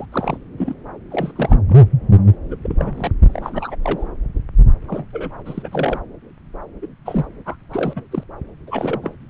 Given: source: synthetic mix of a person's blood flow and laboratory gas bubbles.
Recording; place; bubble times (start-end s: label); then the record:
Doppler ultrasound of blood flow; subclavian vein
0.00-0.06 s: bubbles
0.12-0.38 s: bubbles
0.58-0.74 s: bubbles
1.10-1.32 s: bubbles
1.35-1.58 s: bubbles
1.69-1.86 s: bubbles
2.48-2.56 s: bubbles
2.63-3.12 s: bubbles
3.23-3.75 s: bubbles
3.82-4.08 s: bubbles
4.88-5.05 s: bubbles
5.12-5.30 s: bubbles
5.45-6.00 s: bubbles
6.82-6.87 s: bubbles
7.05-7.25 s: bubbles
7.46-7.56 s: bubbles
7.71-8.03 s: bubbles
8.11-8.23 s: bubbles
8.67-9.14 s: bubbles
From the record:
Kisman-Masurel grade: 242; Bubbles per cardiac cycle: several, 3 to 8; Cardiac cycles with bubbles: 100%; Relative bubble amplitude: moderate (0.250 to 0.450); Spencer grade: 3 (all of the cardiac periods contain showers or single bubble signals, but not dominating or overriding the cardiac motion signals); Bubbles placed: anywhere in the cardiac cycle